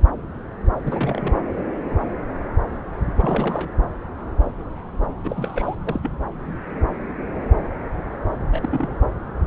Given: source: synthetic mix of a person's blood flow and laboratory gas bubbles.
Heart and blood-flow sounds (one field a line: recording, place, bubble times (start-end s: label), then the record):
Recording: Doppler ultrasound of blood flow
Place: subclavian vein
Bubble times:
0.85-1.41 s: bubbles
3.20-3.70 s: bubbles
5.24-5.75 s: bubbles
5.84-6.11 s: bubbles
8.51-8.94 s: bubbles
From the record:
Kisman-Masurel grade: 221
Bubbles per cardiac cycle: several, 3 to 8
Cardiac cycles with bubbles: 10 to 50%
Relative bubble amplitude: barely perceptible (0.100 to 0.250)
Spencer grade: 2 (many but less than half of the cardiac periods contain bubble signals, singularly or in groups)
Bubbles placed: anywhere in the cardiac cycle